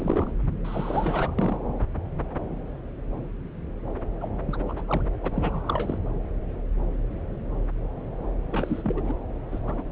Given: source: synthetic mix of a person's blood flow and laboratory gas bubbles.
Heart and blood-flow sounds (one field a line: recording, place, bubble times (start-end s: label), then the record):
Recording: Doppler ultrasound of blood flow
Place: subclavian vein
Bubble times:
0.00-0.32 s: bubbles
0.64-1.57 s: bubbles
4.20-4.29 s: bubbles
4.43-4.64 s: bubbles
4.67-4.83 s: bubbles
4.88-5.06 s: bubbles
5.23-5.31 s: bubbles
5.34-5.98 s: bubbles
8.51-9.02 s: bubbles
9.04-9.15 s: bubbles
9.52-9.60 s: bubbles
9.66-9.84 s: bubbles
From the record:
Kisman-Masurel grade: 332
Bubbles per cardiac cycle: rolling drumbeat, 9 or more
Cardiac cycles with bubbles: 50 to 99%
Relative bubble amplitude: moderate (0.250 to 0.450)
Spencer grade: 3 (all of the cardiac periods contain showers or single bubble signals, but not dominating or overriding the cardiac motion signals)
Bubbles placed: anywhere in the cardiac cycle